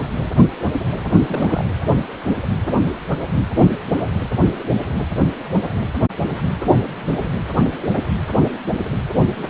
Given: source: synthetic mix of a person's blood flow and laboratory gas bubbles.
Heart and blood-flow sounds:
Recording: Doppler ultrasound of blood flow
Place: precordium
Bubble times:
1.27-1.65 s: bubbles
From the record:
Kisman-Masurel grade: 211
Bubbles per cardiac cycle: several, 3 to 8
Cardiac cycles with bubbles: 1 to 10%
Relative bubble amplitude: barely perceptible (0.100 to 0.250)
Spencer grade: 1 (occasional bubble signal discernible with the cardiac motion signal, with majority of cardiac periods free of bubbles)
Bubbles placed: anywhere in the cardiac cycle

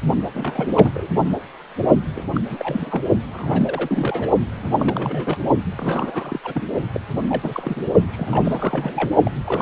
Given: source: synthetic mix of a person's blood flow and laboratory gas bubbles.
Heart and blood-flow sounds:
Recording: Doppler ultrasound of blood flow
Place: precordium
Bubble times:
0.34-0.91 s: bubbles
0.94-1.07 s: bubbles
1.23-1.30 s: bubbles
2.15-2.23 s: bubbles
2.33-2.40 s: bubbles
2.48-3.02 s: bubbles
3.33-4.31 s: bubbles
4.58-4.75 s: bubbles
4.79-5.38 s: bubbles
5.78-6.40 s: bubbles
6.43-6.66 s: bubbles
6.94-7.00 s: bubbles
7.28-7.91 s: bubbles
8.11-9.16 s: bubbles
9.24-9.31 s: bubbles
9.46-9.62 s: bubbles
From the record:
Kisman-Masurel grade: 342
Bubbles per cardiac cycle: rolling drumbeat, 9 or more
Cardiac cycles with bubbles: 100%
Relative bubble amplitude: moderate (0.250 to 0.450)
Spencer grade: 3 (all of the cardiac periods contain showers or single bubble signals, but not dominating or overriding the cardiac motion signals)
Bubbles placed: only in the low amplitude regions of the cardiac cycle

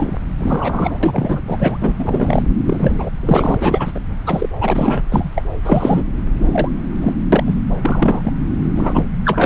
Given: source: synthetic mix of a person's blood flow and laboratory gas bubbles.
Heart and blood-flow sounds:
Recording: Doppler ultrasound of blood flow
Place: subclavian vein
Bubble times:
0.00-0.17 s: bubbles
0.39-0.98 s: bubbles
1.02-1.42 s: bubbles
1.47-1.94 s: bubbles
1.98-2.43 s: bubbles
2.65-3.09 s: bubbles
3.21-3.92 s: bubbles
3.95-4.00 s: bubbles
4.26-4.49 s: bubbles
4.61-5.02 s: bubbles
5.11-5.31 s: bubbles
5.35-5.42 s: bubbles
5.64-6.04 s: bubbles
6.41-6.69 s: bubbles
7.01-7.12 s: bubbles
7.32-7.55 s: bubbles
7.83-8.32 s: bubbles
8.76-9.04 s: bubbles
9.24-9.46 s: bubbles
From the record:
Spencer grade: 3 (all of the cardiac periods contain showers or single bubble signals, but not dominating or overriding the cardiac motion signals)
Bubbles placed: anywhere in the cardiac cycle

